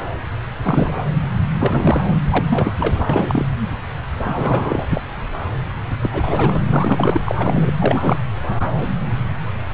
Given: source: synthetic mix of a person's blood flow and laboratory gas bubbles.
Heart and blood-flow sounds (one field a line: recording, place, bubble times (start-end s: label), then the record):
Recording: Doppler ultrasound of blood flow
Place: subclavian vein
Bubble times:
0.62-1.04 s: bubbles
1.56-2.04 s: bubbles
2.30-2.74 s: bubbles
2.78-3.05 s: bubbles
3.09-3.45 s: bubbles
4.23-4.87 s: bubbles
4.89-5.01 s: bubbles
6.02-6.60 s: bubbles
6.67-7.21 s: bubbles
7.25-7.73 s: bubbles
7.79-8.19 s: bubbles
From the record:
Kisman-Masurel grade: 333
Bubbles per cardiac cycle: rolling drumbeat, 9 or more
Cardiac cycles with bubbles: 50 to 99%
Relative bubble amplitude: loud (0.450 to 0.775)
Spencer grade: 3 (all of the cardiac periods contain showers or single bubble signals, but not dominating or overriding the cardiac motion signals)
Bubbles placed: anywhere in the cardiac cycle